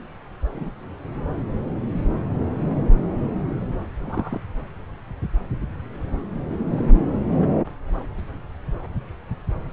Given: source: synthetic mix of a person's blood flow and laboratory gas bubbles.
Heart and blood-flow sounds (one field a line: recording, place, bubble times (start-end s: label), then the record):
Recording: Doppler ultrasound of blood flow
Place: subclavian vein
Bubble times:
0.54-0.70 s: bubbles
3.98-4.40 s: bubbles
6.70-7.02 s: bubbles
From the record:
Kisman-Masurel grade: 121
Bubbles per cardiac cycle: 1 to 2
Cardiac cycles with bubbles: 10 to 50%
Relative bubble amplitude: barely perceptible (0.100 to 0.250)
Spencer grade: 2 (many but less than half of the cardiac periods contain bubble signals, singularly or in groups)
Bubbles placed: anywhere in the cardiac cycle